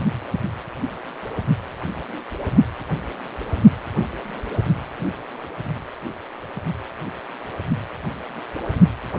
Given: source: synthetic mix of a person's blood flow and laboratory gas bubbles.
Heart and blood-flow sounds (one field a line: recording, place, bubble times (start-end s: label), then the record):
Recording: Doppler ultrasound of blood flow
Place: precordium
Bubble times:
no bubbles
From the record:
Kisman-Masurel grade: 000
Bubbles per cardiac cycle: 0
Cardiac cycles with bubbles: 0%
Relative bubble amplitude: no bubbles discernible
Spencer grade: 0 (complete lack of bubble signals)